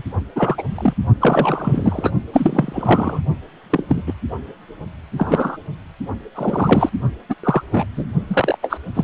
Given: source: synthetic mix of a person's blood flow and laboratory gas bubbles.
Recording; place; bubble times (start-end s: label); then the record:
Doppler ultrasound of blood flow; precordium
0.00-0.03 s: bubbles
0.35-0.63 s: bubbles
0.69-0.94 s: bubbles
1.21-2.11 s: bubbles
2.33-3.21 s: bubbles
3.70-3.83 s: bubbles
3.88-4.04 s: bubbles
4.06-4.14 s: bubbles
5.17-5.57 s: bubbles
6.34-6.90 s: bubbles
7.29-7.35 s: bubbles
7.43-7.62 s: bubbles
7.71-7.85 s: bubbles
7.96-8.07 s: bubbles
8.28-8.58 s: bubbles
8.62-8.78 s: bubbles
8.94-9.04 s: bubbles
From the record:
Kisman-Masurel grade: 243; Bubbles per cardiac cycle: several, 3 to 8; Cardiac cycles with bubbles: 100%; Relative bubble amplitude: loud (0.450 to 0.775); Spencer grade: 3 (all of the cardiac periods contain showers or single bubble signals, but not dominating or overriding the cardiac motion signals); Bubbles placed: only in the low amplitude regions of the cardiac cycle